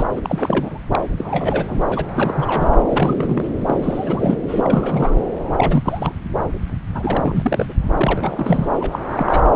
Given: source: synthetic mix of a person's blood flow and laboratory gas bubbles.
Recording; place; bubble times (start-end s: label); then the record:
Doppler ultrasound of blood flow; subclavian vein
0.00-0.05 s: bubbles
0.15-0.22 s: bubbles
0.24-0.80 s: bubbles
0.92-0.99 s: bubbles
1.18-1.81 s: bubbles
1.89-2.06 s: bubbles
2.14-2.71 s: bubbles
2.89-3.49 s: bubbles
3.65-4.38 s: bubbles
4.48-5.16 s: bubbles
5.57-6.12 s: bubbles
6.95-7.74 s: bubbles
7.98-8.67 s: bubbles
8.80-8.99 s: bubbles
9.09-9.43 s: bubbles
From the record:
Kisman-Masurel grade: 342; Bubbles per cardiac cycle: rolling drumbeat, 9 or more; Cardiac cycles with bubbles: 100%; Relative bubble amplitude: moderate (0.250 to 0.450); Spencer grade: 3 (all of the cardiac periods contain showers or single bubble signals, but not dominating or overriding the cardiac motion signals); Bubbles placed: anywhere in the cardiac cycle